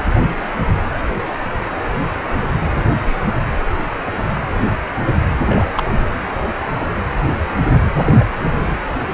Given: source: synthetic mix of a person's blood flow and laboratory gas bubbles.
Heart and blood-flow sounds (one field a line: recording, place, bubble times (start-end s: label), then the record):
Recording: Doppler ultrasound of blood flow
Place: precordium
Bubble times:
5.45-5.71 s: bubbles
5.77-5.83 s: bubbles
7.93-8.15 s: bubbles
8.18-8.25 s: bubbles
8.43-8.50 s: bubbles
From the record:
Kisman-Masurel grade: 222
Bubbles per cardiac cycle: several, 3 to 8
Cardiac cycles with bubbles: 10 to 50%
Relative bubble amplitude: moderate (0.250 to 0.450)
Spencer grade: 2 (many but less than half of the cardiac periods contain bubble signals, singularly or in groups)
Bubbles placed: anywhere in the cardiac cycle